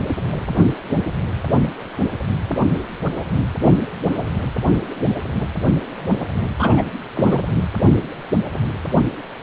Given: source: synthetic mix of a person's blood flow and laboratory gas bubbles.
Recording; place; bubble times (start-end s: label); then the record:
Doppler ultrasound of blood flow; precordium
6.58-6.83 s: bubbles
7.15-7.44 s: bubbles
From the record:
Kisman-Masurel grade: 213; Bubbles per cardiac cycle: several, 3 to 8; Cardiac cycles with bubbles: 1 to 10%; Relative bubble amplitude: loud (0.450 to 0.775); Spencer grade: 1 (occasional bubble signal discernible with the cardiac motion signal, with majority of cardiac periods free of bubbles); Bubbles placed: anywhere in the cardiac cycle